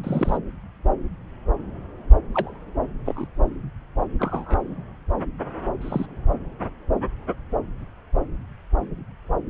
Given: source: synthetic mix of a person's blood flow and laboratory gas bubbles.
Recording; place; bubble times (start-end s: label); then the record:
Doppler ultrasound of blood flow; subclavian vein
0.03-0.38 s: bubbles
2.32-2.59 s: bubbles
3.05-3.28 s: bubbles
4.19-4.63 s: bubbles
5.81-6.06 s: bubbles
From the record:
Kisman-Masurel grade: 121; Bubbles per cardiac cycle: 1 to 2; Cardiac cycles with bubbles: 10 to 50%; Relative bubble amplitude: barely perceptible (0.100 to 0.250); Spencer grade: 2 (many but less than half of the cardiac periods contain bubble signals, singularly or in groups); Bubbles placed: anywhere in the cardiac cycle